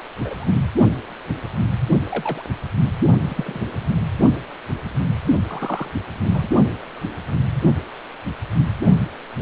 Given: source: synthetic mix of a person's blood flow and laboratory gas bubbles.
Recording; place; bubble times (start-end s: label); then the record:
Doppler ultrasound of blood flow; precordium
0.24-0.34 s: bubbles
0.40-0.61 s: bubbles
2.04-2.43 s: bubbles
3.29-3.60 s: bubbles
5.48-5.90 s: bubbles
6.23-6.49 s: bubbles
From the record:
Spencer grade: 2 (many but less than half of the cardiac periods contain bubble signals, singularly or in groups); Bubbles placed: only in the low amplitude regions of the cardiac cycle